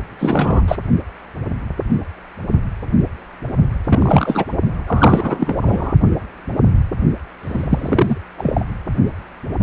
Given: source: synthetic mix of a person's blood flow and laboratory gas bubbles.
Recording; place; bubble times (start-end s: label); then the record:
Doppler ultrasound of blood flow; precordium
0.00-0.02 s: bubbles
0.18-0.75 s: bubbles
3.85-4.44 s: bubbles
4.87-5.56 s: bubbles
5.61-5.94 s: bubbles
7.42-8.18 s: bubbles
8.38-8.65 s: bubbles
From the record:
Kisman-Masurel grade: 223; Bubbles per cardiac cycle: several, 3 to 8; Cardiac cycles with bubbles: 10 to 50%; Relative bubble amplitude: loud (0.450 to 0.775); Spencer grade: 2 (many but less than half of the cardiac periods contain bubble signals, singularly or in groups); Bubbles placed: only in the low amplitude regions of the cardiac cycle